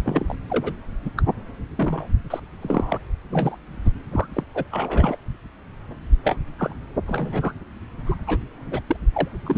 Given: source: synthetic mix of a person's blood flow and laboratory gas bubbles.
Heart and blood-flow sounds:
Doppler ultrasound of blood flow; subclavian vein
0.04-0.35 s: bubbles
0.49-0.73 s: bubbles
1.05-1.10 s: bubbles
1.17-1.23 s: bubbles
1.78-2.06 s: bubbles
2.30-2.40 s: bubbles
2.61-2.97 s: bubbles
3.29-3.58 s: bubbles
3.84-3.91 s: bubbles
4.12-4.27 s: bubbles
4.33-4.44 s: bubbles
4.54-4.65 s: bubbles
4.71-5.17 s: bubbles
6.23-6.37 s: bubbles
6.58-6.75 s: bubbles
7.07-7.52 s: bubbles
8.05-8.14 s: bubbles
8.27-8.38 s: bubbles
8.67-8.80 s: bubbles
8.87-8.96 s: bubbles
9.13-9.28 s: bubbles
9.44-9.58 s: bubbles
From the record:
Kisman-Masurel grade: 242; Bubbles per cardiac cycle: several, 3 to 8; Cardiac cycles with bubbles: 100%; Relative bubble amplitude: moderate (0.250 to 0.450); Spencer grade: 3 (all of the cardiac periods contain showers or single bubble signals, but not dominating or overriding the cardiac motion signals); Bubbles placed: anywhere in the cardiac cycle

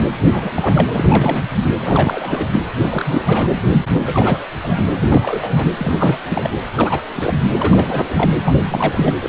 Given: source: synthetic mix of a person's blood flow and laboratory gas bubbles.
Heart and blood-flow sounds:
Doppler ultrasound of blood flow; precordium
0.00-0.04 s: bubbles
0.18-0.87 s: bubbles
0.93-1.44 s: bubbles
1.78-2.48 s: bubbles
2.52-2.60 s: bubbles
2.80-3.47 s: bubbles
3.93-4.39 s: bubbles
4.62-4.91 s: bubbles
5.00-5.67 s: bubbles
5.77-6.20 s: bubbles
6.25-6.50 s: bubbles
6.77-7.01 s: bubbles
7.17-7.34 s: bubbles
7.58-8.30 s: bubbles
8.44-9.14 s: bubbles
9.21-9.29 s: bubbles
From the record:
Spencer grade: 3 (all of the cardiac periods contain showers or single bubble signals, but not dominating or overriding the cardiac motion signals); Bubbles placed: anywhere in the cardiac cycle

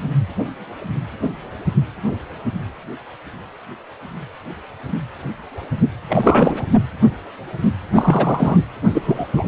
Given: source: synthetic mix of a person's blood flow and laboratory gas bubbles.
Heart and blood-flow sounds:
Doppler ultrasound of blood flow; precordium
6.08-6.67 s: bubbles
7.93-8.58 s: bubbles
8.94-9.26 s: bubbles
9.36-9.47 s: bubbles
From the record:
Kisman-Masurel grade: 223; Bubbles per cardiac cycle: several, 3 to 8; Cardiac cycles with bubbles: 10 to 50%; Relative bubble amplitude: loud (0.450 to 0.775); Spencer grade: 2 (many but less than half of the cardiac periods contain bubble signals, singularly or in groups); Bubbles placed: anywhere in the cardiac cycle

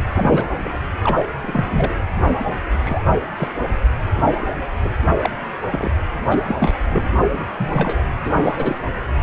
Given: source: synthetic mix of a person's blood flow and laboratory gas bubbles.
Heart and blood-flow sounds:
Doppler ultrasound of blood flow; precordium
0.12-0.49 s: bubbles
0.63-0.69 s: bubbles
1.03-1.29 s: bubbles
1.42-1.94 s: bubbles
2.71-3.03 s: bubbles
3.36-3.48 s: bubbles
4.81-4.91 s: bubbles
5.06-5.12 s: bubbles
5.23-5.31 s: bubbles
5.71-5.92 s: bubbles
6.27-6.80 s: bubbles
6.91-7.06 s: bubbles
7.21-7.45 s: bubbles
7.58-8.02 s: bubbles
8.24-8.78 s: bubbles
From the record:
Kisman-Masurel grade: 242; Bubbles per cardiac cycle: several, 3 to 8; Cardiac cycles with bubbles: 100%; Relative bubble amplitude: moderate (0.250 to 0.450); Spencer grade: 3 (all of the cardiac periods contain showers or single bubble signals, but not dominating or overriding the cardiac motion signals); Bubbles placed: anywhere in the cardiac cycle

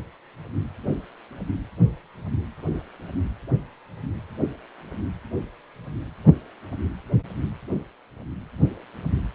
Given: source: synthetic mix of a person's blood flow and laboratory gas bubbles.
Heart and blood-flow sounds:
Doppler ultrasound of blood flow; precordium
no bubbles
From the record:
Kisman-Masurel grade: 000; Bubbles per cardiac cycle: 0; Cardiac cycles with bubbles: 0%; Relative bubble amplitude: no bubbles discernible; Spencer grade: 0 (complete lack of bubble signals)

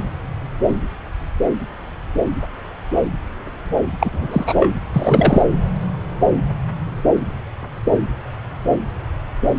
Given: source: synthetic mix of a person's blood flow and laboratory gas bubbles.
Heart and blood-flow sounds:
Doppler ultrasound of blood flow; subclavian vein
3.99-4.70 s: bubbles
4.93-5.42 s: bubbles
From the record:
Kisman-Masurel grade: 213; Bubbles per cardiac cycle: several, 3 to 8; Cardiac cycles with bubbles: 1 to 10%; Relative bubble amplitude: loud (0.450 to 0.775); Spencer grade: 1 (occasional bubble signal discernible with the cardiac motion signal, with majority of cardiac periods free of bubbles); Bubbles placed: anywhere in the cardiac cycle

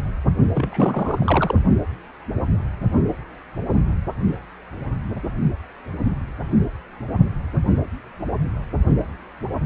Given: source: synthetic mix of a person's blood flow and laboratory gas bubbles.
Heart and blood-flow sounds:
Doppler ultrasound of blood flow; precordium
0.55-1.58 s: bubbles
From the record:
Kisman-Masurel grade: 212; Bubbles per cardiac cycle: several, 3 to 8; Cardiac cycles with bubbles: 1 to 10%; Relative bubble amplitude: moderate (0.250 to 0.450); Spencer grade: 1 (occasional bubble signal discernible with the cardiac motion signal, with majority of cardiac periods free of bubbles); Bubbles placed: only in the low amplitude regions of the cardiac cycle

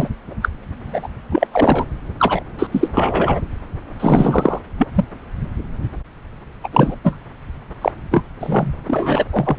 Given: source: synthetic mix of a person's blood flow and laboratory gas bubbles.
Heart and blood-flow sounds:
Doppler ultrasound of blood flow; subclavian vein
0.00-0.08 s: bubbles
0.42-0.48 s: bubbles
0.86-1.08 s: bubbles
1.31-1.47 s: bubbles
1.52-1.85 s: bubbles
2.19-2.43 s: bubbles
2.58-2.67 s: bubbles
2.72-2.88 s: bubbles
2.95-3.40 s: bubbles
4.00-4.59 s: bubbles
4.78-4.87 s: bubbles
4.94-5.04 s: bubbles
6.63-6.68 s: bubbles
6.72-6.95 s: bubbles
7.04-7.17 s: bubbles
7.81-7.92 s: bubbles
8.11-8.23 s: bubbles
8.40-8.73 s: bubbles
8.88-9.25 s: bubbles
9.33-9.57 s: bubbles
From the record:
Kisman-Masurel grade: 233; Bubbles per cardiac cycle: several, 3 to 8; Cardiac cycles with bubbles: 50 to 99%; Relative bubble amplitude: loud (0.450 to 0.775); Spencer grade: 3 (all of the cardiac periods contain showers or single bubble signals, but not dominating or overriding the cardiac motion signals); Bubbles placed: anywhere in the cardiac cycle

